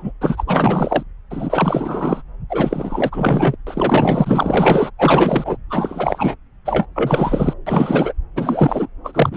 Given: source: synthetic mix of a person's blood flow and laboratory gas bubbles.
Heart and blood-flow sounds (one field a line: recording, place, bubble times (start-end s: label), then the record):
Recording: Doppler ultrasound of blood flow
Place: subclavian vein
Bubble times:
0.00-0.12 s: bubbles
0.21-0.44 s: bubbles
0.47-1.03 s: bubbles
1.30-2.22 s: bubbles
2.50-3.56 s: bubbles
3.67-4.90 s: bubbles
4.98-5.57 s: bubbles
5.68-6.35 s: bubbles
6.65-6.86 s: bubbles
6.95-7.53 s: bubbles
7.67-8.13 s: bubbles
8.36-8.88 s: bubbles
9.04-9.37 s: bubbles
From the record:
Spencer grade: 4 (maximum detectable bubble signal sounding continuously throughout systole and diastole of every cardiac period, and overriding the amplitude of the normal cardiac signals)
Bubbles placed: anywhere in the cardiac cycle